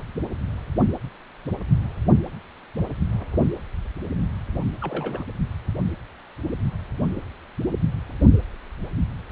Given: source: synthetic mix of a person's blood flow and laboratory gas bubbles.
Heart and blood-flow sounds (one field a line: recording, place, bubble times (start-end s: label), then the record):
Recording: Doppler ultrasound of blood flow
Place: precordium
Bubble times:
4.55-4.63 s: bubbles
4.80-5.25 s: bubbles
From the record:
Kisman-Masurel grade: 211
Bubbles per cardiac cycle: several, 3 to 8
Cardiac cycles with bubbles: 1 to 10%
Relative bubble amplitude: barely perceptible (0.100 to 0.250)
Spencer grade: 1 (occasional bubble signal discernible with the cardiac motion signal, with majority of cardiac periods free of bubbles)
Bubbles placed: anywhere in the cardiac cycle